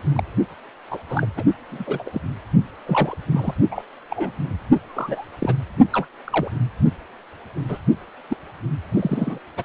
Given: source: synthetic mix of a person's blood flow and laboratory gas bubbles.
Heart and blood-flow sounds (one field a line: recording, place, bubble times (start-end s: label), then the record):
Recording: Doppler ultrasound of blood flow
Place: precordium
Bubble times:
0.15-0.24 s: bubbles
0.90-0.98 s: bubbles
1.09-1.25 s: bubbles
1.36-1.43 s: bubbles
1.69-1.84 s: bubbles
1.87-2.03 s: bubbles
2.05-2.21 s: bubbles
2.86-3.17 s: bubbles
3.31-3.54 s: bubbles
3.71-3.82 s: bubbles
4.10-4.32 s: bubbles
4.85-5.28 s: bubbles
5.39-5.55 s: bubbles
5.92-6.07 s: bubbles
6.25-6.51 s: bubbles
7.69-7.78 s: bubbles
8.29-8.37 s: bubbles
8.92-9.39 s: bubbles
9.57-9.63 s: bubbles
From the record:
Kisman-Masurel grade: 242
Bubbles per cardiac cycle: several, 3 to 8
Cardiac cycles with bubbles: 100%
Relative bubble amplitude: moderate (0.250 to 0.450)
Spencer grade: 3 (all of the cardiac periods contain showers or single bubble signals, but not dominating or overriding the cardiac motion signals)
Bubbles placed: only in the low amplitude regions of the cardiac cycle